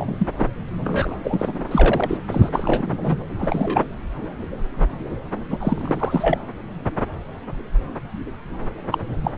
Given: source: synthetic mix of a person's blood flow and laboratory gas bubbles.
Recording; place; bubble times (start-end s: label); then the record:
Doppler ultrasound of blood flow; subclavian vein
0.00-0.27 s: bubbles
0.38-0.46 s: bubbles
0.84-1.17 s: bubbles
1.24-2.17 s: bubbles
2.31-3.18 s: bubbles
3.38-3.84 s: bubbles
5.50-6.38 s: bubbles
8.91-8.98 s: bubbles
9.23-9.30 s: bubbles
From the record:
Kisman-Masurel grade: 332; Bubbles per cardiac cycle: rolling drumbeat, 9 or more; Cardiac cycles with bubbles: 50 to 99%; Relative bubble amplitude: moderate (0.250 to 0.450); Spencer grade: 3 (all of the cardiac periods contain showers or single bubble signals, but not dominating or overriding the cardiac motion signals); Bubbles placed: anywhere in the cardiac cycle